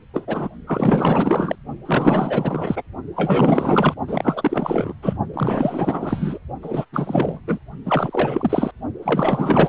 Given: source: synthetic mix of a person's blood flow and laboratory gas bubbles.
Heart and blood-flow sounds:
Doppler ultrasound of blood flow; precordium
0.13-0.49 s: bubbles
0.66-1.56 s: bubbles
1.85-2.83 s: bubbles
3.16-3.94 s: bubbles
4.07-4.93 s: bubbles
5.02-5.17 s: bubbles
5.33-6.38 s: bubbles
6.62-6.85 s: bubbles
6.92-7.40 s: bubbles
7.47-7.59 s: bubbles
7.85-8.71 s: bubbles
9.03-9.69 s: bubbles
From the record:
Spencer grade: 4 (maximum detectable bubble signal sounding continuously throughout systole and diastole of every cardiac period, and overriding the amplitude of the normal cardiac signals); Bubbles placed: only in the low amplitude regions of the cardiac cycle

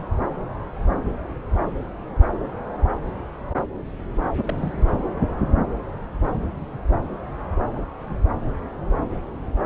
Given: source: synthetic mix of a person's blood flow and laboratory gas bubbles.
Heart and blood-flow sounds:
Doppler ultrasound of blood flow; subclavian vein
4.43-4.88 s: bubbles
From the record:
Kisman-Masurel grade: 211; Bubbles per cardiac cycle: several, 3 to 8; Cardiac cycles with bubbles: 1 to 10%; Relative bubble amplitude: barely perceptible (0.100 to 0.250); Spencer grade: 1 (occasional bubble signal discernible with the cardiac motion signal, with majority of cardiac periods free of bubbles); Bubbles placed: anywhere in the cardiac cycle

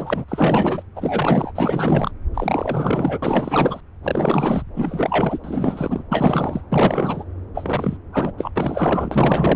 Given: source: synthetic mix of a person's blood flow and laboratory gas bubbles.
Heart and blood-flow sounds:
Doppler ultrasound of blood flow; subclavian vein
0.00-0.25 s: bubbles
0.28-0.83 s: bubbles
0.96-1.52 s: bubbles
1.55-2.11 s: bubbles
2.34-3.18 s: bubbles
3.22-3.81 s: bubbles
4.04-4.62 s: bubbles
4.75-5.40 s: bubbles
5.44-6.04 s: bubbles
6.11-6.64 s: bubbles
6.71-7.24 s: bubbles
7.54-7.97 s: bubbles
8.12-8.33 s: bubbles
8.38-8.51 s: bubbles
8.55-9.56 s: bubbles
From the record:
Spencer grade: 4 (maximum detectable bubble signal sounding continuously throughout systole and diastole of every cardiac period, and overriding the amplitude of the normal cardiac signals); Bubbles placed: anywhere in the cardiac cycle

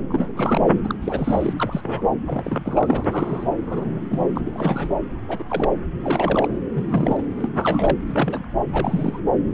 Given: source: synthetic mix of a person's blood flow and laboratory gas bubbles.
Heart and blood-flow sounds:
Doppler ultrasound of blood flow; subclavian vein
0.08-0.59 s: bubbles
0.83-0.95 s: bubbles
1.01-1.53 s: bubbles
1.57-2.08 s: bubbles
2.26-3.08 s: bubbles
3.12-3.57 s: bubbles
3.66-4.00 s: bubbles
4.10-4.25 s: bubbles
4.35-4.41 s: bubbles
4.46-4.96 s: bubbles
5.28-5.43 s: bubbles
5.50-5.69 s: bubbles
6.04-6.47 s: bubbles
6.72-7.22 s: bubbles
7.38-7.49 s: bubbles
7.56-7.98 s: bubbles
8.07-8.45 s: bubbles
8.72-9.20 s: bubbles
From the record:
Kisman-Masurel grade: 242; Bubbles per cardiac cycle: several, 3 to 8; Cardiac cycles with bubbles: 100%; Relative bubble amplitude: moderate (0.250 to 0.450); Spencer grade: 3 (all of the cardiac periods contain showers or single bubble signals, but not dominating or overriding the cardiac motion signals); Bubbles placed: anywhere in the cardiac cycle

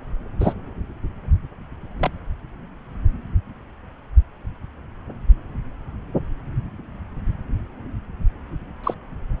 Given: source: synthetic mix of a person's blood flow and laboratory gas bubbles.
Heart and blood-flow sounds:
Doppler ultrasound of blood flow; subclavian vein
0.40-0.54 s: bubbles
2.00-2.11 s: bubbles
8.84-8.94 s: bubbles
From the record:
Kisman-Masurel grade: 122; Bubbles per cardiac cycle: 1 to 2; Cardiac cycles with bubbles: 10 to 50%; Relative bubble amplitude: moderate (0.250 to 0.450); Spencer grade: 2 (many but less than half of the cardiac periods contain bubble signals, singularly or in groups); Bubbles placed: anywhere in the cardiac cycle

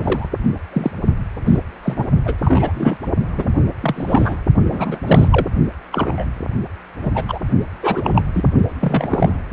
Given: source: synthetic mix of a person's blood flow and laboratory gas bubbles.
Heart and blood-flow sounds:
Doppler ultrasound of blood flow; precordium
0.00-0.27 s: bubbles
0.73-0.91 s: bubbles
1.45-1.60 s: bubbles
1.83-2.10 s: bubbles
2.25-2.35 s: bubbles
2.43-2.97 s: bubbles
3.37-3.47 s: bubbles
3.81-4.36 s: bubbles
4.71-4.98 s: bubbles
5.06-5.46 s: bubbles
5.92-6.25 s: bubbles
7.01-7.25 s: bubbles
7.28-7.39 s: bubbles
7.82-8.22 s: bubbles
8.34-8.49 s: bubbles
8.80-9.36 s: bubbles
From the record:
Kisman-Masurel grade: 243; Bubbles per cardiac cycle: several, 3 to 8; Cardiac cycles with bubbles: 100%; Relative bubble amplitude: loud (0.450 to 0.775); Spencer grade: 3 (all of the cardiac periods contain showers or single bubble signals, but not dominating or overriding the cardiac motion signals); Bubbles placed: only in the low amplitude regions of the cardiac cycle

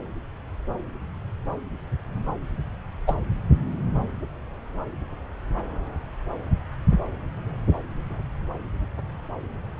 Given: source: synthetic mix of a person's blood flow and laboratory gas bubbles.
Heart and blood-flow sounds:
Doppler ultrasound of blood flow; subclavian vein
3.07-3.15 s: bubbles
From the record:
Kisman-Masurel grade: 113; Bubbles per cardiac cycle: 1 to 2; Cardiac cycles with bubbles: 1 to 10%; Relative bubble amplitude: loud (0.450 to 0.775); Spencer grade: 1 (occasional bubble signal discernible with the cardiac motion signal, with majority of cardiac periods free of bubbles); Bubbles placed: anywhere in the cardiac cycle

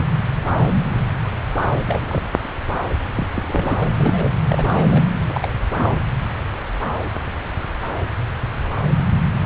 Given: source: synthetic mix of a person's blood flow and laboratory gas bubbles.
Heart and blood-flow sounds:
Doppler ultrasound of blood flow; subclavian vein
1.86-2.22 s: bubbles
3.15-3.27 s: bubbles
3.34-3.88 s: bubbles
3.96-4.33 s: bubbles
4.47-5.03 s: bubbles
5.27-5.48 s: bubbles
5.75-5.97 s: bubbles
From the record:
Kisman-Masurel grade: 221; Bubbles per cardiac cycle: several, 3 to 8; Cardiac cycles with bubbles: 10 to 50%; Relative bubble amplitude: barely perceptible (0.100 to 0.250); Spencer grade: 2 (many but less than half of the cardiac periods contain bubble signals, singularly or in groups); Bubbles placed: anywhere in the cardiac cycle

